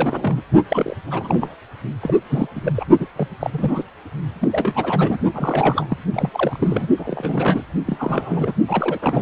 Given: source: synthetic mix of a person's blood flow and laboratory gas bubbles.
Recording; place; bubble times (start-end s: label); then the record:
Doppler ultrasound of blood flow; precordium
0.00-0.42 s: bubbles
0.69-0.96 s: bubbles
1.07-1.55 s: bubbles
2.01-2.14 s: bubbles
2.29-2.47 s: bubbles
2.55-2.72 s: bubbles
2.75-2.85 s: bubbles
2.99-3.07 s: bubbles
3.16-3.29 s: bubbles
3.41-3.50 s: bubbles
3.53-3.83 s: bubbles
4.41-4.48 s: bubbles
4.52-5.19 s: bubbles
5.33-5.98 s: bubbles
6.12-6.88 s: bubbles
6.97-7.65 s: bubbles
7.87-8.52 s: bubbles
8.67-9.22 s: bubbles
From the record:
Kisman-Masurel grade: 342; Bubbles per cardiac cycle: rolling drumbeat, 9 or more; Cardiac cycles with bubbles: 100%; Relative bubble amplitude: moderate (0.250 to 0.450); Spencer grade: 3 (all of the cardiac periods contain showers or single bubble signals, but not dominating or overriding the cardiac motion signals); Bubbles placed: only in the low amplitude regions of the cardiac cycle